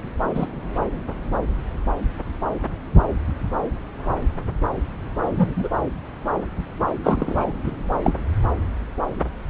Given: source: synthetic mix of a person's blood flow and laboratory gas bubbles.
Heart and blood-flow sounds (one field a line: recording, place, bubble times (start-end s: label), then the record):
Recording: Doppler ultrasound of blood flow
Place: subclavian vein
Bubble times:
0.34-0.47 s: bubbles
5.29-5.69 s: bubbles
7.03-7.53 s: bubbles
7.64-7.72 s: bubbles
8.03-8.15 s: bubbles
From the record:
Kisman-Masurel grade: 122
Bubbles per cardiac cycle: 1 to 2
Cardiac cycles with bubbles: 10 to 50%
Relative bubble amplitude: moderate (0.250 to 0.450)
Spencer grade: 2 (many but less than half of the cardiac periods contain bubble signals, singularly or in groups)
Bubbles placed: anywhere in the cardiac cycle